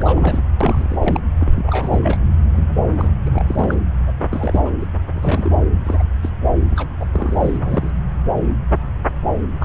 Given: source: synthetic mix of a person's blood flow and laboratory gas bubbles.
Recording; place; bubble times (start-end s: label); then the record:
Doppler ultrasound of blood flow; subclavian vein
0.01-0.42 s: bubbles
0.60-1.20 s: bubbles
1.41-2.17 s: bubbles
2.56-2.67 s: bubbles
2.98-3.08 s: bubbles
3.25-3.44 s: bubbles
3.48-3.75 s: bubbles
4.06-4.13 s: bubbles
4.29-4.71 s: bubbles
4.80-4.85 s: bubbles
5.14-5.62 s: bubbles
5.84-6.03 s: bubbles
6.22-6.30 s: bubbles
6.71-6.87 s: bubbles
6.99-7.05 s: bubbles
7.12-7.90 s: bubbles
9.60-9.65 s: bubbles
From the record:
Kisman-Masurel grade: 332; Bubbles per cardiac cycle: rolling drumbeat, 9 or more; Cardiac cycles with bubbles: 50 to 99%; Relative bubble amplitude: moderate (0.250 to 0.450); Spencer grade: 3 (all of the cardiac periods contain showers or single bubble signals, but not dominating or overriding the cardiac motion signals); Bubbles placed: anywhere in the cardiac cycle